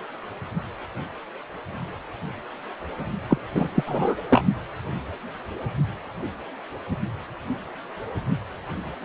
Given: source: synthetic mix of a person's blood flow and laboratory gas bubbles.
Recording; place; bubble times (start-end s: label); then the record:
Doppler ultrasound of blood flow; precordium
3.29-3.38 s: bubbles
3.55-3.69 s: bubbles
3.74-3.84 s: bubbles
3.86-4.16 s: bubbles
4.29-4.41 s: bubbles
From the record:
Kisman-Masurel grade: 212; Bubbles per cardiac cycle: several, 3 to 8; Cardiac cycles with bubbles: 1 to 10%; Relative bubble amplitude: moderate (0.250 to 0.450); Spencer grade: 1 (occasional bubble signal discernible with the cardiac motion signal, with majority of cardiac periods free of bubbles); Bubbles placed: only in the low amplitude regions of the cardiac cycle